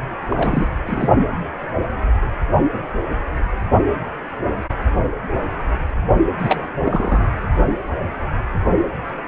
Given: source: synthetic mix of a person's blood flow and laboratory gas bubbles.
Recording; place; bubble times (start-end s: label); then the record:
Doppler ultrasound of blood flow; precordium
0.30-0.67 s: bubbles
0.87-1.09 s: bubbles
6.38-6.67 s: bubbles
6.85-7.30 s: bubbles
From the record:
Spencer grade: 2 (many but less than half of the cardiac periods contain bubble signals, singularly or in groups); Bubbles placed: only in the low amplitude regions of the cardiac cycle